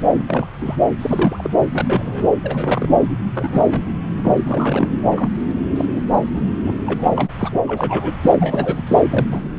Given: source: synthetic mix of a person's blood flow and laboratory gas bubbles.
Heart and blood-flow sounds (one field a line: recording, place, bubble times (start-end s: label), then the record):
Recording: Doppler ultrasound of blood flow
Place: subclavian vein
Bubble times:
0.00-0.03 s: bubbles
0.17-0.23 s: bubbles
0.27-0.45 s: bubbles
0.61-0.76 s: bubbles
0.98-1.50 s: bubbles
1.73-2.27 s: bubbles
2.44-2.89 s: bubbles
3.34-3.85 s: bubbles
4.17-4.34 s: bubbles
4.45-4.88 s: bubbles
5.11-5.29 s: bubbles
5.75-5.86 s: bubbles
5.91-6.03 s: bubbles
6.34-6.42 s: bubbles
6.66-6.83 s: bubbles
6.86-7.12 s: bubbles
7.16-7.30 s: bubbles
7.38-7.50 s: bubbles
7.66-8.14 s: bubbles
8.22-8.84 s: bubbles
8.86-9.01 s: bubbles
9.10-9.27 s: bubbles
9.31-9.42 s: bubbles
From the record:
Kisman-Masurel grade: 242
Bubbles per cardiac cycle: several, 3 to 8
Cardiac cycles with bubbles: 100%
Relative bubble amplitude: moderate (0.250 to 0.450)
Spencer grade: 3 (all of the cardiac periods contain showers or single bubble signals, but not dominating or overriding the cardiac motion signals)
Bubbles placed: anywhere in the cardiac cycle